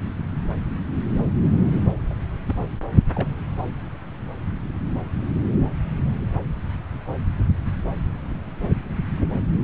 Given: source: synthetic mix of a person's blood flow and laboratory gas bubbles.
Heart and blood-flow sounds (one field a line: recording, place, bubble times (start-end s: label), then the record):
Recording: Doppler ultrasound of blood flow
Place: subclavian vein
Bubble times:
2.10-2.14 s: bubbles
2.48-2.55 s: bubbles
2.59-2.68 s: bubbles
2.91-3.02 s: bubbles
3.15-3.29 s: bubbles
From the record:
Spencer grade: 1 (occasional bubble signal discernible with the cardiac motion signal, with majority of cardiac periods free of bubbles)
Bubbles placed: anywhere in the cardiac cycle